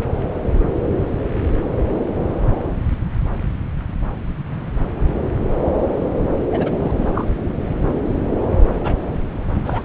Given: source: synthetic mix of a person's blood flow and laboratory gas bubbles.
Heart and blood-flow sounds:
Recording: Doppler ultrasound of blood flow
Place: subclavian vein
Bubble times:
6.52-6.71 s: bubbles
6.77-6.91 s: bubbles
6.96-7.25 s: bubbles
8.83-8.95 s: bubbles
9.63-9.83 s: bubbles
From the record:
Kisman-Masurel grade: 212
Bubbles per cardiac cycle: several, 3 to 8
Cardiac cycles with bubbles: 1 to 10%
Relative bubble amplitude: moderate (0.250 to 0.450)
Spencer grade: 1 (occasional bubble signal discernible with the cardiac motion signal, with majority of cardiac periods free of bubbles)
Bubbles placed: anywhere in the cardiac cycle

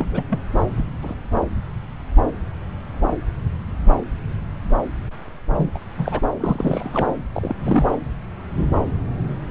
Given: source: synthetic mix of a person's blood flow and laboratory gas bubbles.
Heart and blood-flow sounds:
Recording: Doppler ultrasound of blood flow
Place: subclavian vein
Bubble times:
0.00-0.05 s: bubbles
0.11-0.26 s: bubbles
0.29-0.40 s: bubbles
0.54-0.63 s: bubbles
0.77-0.83 s: bubbles
1.01-1.15 s: bubbles
1.31-1.41 s: bubbles
5.51-5.71 s: bubbles
5.74-5.79 s: bubbles
5.97-6.21 s: bubbles
6.40-6.90 s: bubbles
6.93-7.08 s: bubbles
7.33-7.55 s: bubbles
7.59-7.86 s: bubbles
From the record:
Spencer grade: 2 (many but less than half of the cardiac periods contain bubble signals, singularly or in groups)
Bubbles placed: anywhere in the cardiac cycle

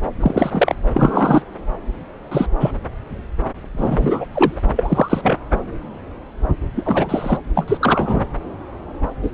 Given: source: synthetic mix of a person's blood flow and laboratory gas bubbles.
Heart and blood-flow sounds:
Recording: Doppler ultrasound of blood flow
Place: subclavian vein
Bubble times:
0.20-0.75 s: bubbles
0.94-1.42 s: bubbles
2.31-2.46 s: bubbles
2.60-2.71 s: bubbles
3.72-4.27 s: bubbles
4.31-4.65 s: bubbles
4.78-5.37 s: bubbles
6.76-7.38 s: bubbles
7.55-8.22 s: bubbles
9.22-9.34 s: bubbles
From the record:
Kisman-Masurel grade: 233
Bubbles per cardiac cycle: several, 3 to 8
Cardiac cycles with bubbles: 50 to 99%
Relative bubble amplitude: loud (0.450 to 0.775)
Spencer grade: 3 (all of the cardiac periods contain showers or single bubble signals, but not dominating or overriding the cardiac motion signals)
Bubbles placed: anywhere in the cardiac cycle

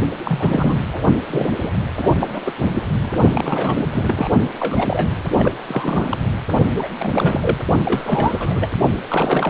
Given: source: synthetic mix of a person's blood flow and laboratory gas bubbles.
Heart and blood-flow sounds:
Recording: Doppler ultrasound of blood flow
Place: precordium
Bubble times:
0.23-0.82 s: bubbles
0.92-1.04 s: bubbles
1.29-1.50 s: bubbles
1.59-1.71 s: bubbles
1.97-2.10 s: bubbles
2.19-2.52 s: bubbles
2.67-2.87 s: bubbles
3.02-3.12 s: bubbles
3.33-3.85 s: bubbles
3.93-4.29 s: bubbles
4.59-5.09 s: bubbles
5.38-5.51 s: bubbles
5.68-6.17 s: bubbles
6.75-6.88 s: bubbles
6.98-7.57 s: bubbles
7.85-8.76 s: bubbles
9.09-9.50 s: bubbles
From the record:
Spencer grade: 3 (all of the cardiac periods contain showers or single bubble signals, but not dominating or overriding the cardiac motion signals)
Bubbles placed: only in the low amplitude regions of the cardiac cycle

